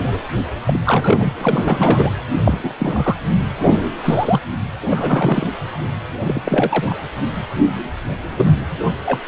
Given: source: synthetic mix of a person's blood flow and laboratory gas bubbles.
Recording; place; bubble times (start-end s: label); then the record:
Doppler ultrasound of blood flow; precordium
0.67-0.80 s: bubbles
0.85-1.32 s: bubbles
1.38-2.12 s: bubbles
2.44-2.75 s: bubbles
2.79-3.17 s: bubbles
4.00-4.41 s: bubbles
4.90-5.46 s: bubbles
6.21-6.41 s: bubbles
6.45-6.95 s: bubbles
8.30-8.65 s: bubbles
9.04-9.20 s: bubbles
From the record:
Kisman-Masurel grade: 232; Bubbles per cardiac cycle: several, 3 to 8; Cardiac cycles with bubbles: 50 to 99%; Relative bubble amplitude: moderate (0.250 to 0.450); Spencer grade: 3 (all of the cardiac periods contain showers or single bubble signals, but not dominating or overriding the cardiac motion signals); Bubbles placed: anywhere in the cardiac cycle